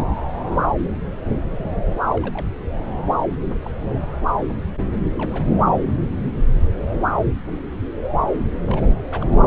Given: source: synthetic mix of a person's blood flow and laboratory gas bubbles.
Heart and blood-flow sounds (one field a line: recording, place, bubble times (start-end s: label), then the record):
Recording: Doppler ultrasound of blood flow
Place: subclavian vein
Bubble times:
1.53-1.84 s: bubbles
2.15-2.48 s: bubbles
3.19-3.24 s: bubbles
3.64-3.71 s: bubbles
3.92-4.17 s: bubbles
5.14-5.56 s: bubbles
8.21-8.26 s: bubbles
8.44-8.53 s: bubbles
8.66-8.87 s: bubbles
9.12-9.25 s: bubbles
9.31-9.44 s: bubbles
From the record:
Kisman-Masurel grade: 221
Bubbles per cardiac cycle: several, 3 to 8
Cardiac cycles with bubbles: 10 to 50%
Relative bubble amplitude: barely perceptible (0.100 to 0.250)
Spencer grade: 2 (many but less than half of the cardiac periods contain bubble signals, singularly or in groups)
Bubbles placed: anywhere in the cardiac cycle